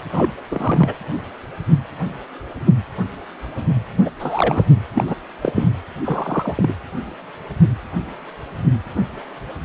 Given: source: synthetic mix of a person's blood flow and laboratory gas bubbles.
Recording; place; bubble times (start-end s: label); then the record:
Doppler ultrasound of blood flow; precordium
0.12-0.33 s: bubbles
0.51-0.93 s: bubbles
4.04-4.09 s: bubbles
4.20-4.67 s: bubbles
4.93-5.04 s: bubbles
5.07-5.16 s: bubbles
5.42-5.68 s: bubbles
6.04-6.74 s: bubbles
From the record:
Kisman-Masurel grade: 222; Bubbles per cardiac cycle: several, 3 to 8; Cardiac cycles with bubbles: 10 to 50%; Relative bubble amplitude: moderate (0.250 to 0.450); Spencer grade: 2 (many but less than half of the cardiac periods contain bubble signals, singularly or in groups); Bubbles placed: anywhere in the cardiac cycle